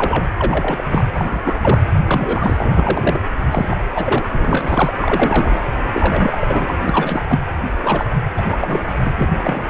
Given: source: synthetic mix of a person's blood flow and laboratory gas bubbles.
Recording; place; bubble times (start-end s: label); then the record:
Doppler ultrasound of blood flow; precordium
0.00-0.27 s: bubbles
0.38-0.89 s: bubbles
0.92-1.04 s: bubbles
1.15-1.40 s: bubbles
1.44-1.55 s: bubbles
1.61-1.82 s: bubbles
2.06-3.20 s: bubbles
3.50-3.77 s: bubbles
3.87-4.28 s: bubbles
4.38-4.93 s: bubbles
5.01-5.65 s: bubbles
5.92-6.72 s: bubbles
6.85-7.24 s: bubbles
7.29-7.40 s: bubbles
7.83-8.06 s: bubbles
8.37-8.42 s: bubbles
8.46-8.57 s: bubbles
8.61-8.85 s: bubbles
9.04-9.28 s: bubbles
9.43-9.70 s: bubbles
From the record:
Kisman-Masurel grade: 342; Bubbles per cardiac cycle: rolling drumbeat, 9 or more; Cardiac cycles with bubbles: 100%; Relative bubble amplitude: moderate (0.250 to 0.450); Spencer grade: 3 (all of the cardiac periods contain showers or single bubble signals, but not dominating or overriding the cardiac motion signals); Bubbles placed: anywhere in the cardiac cycle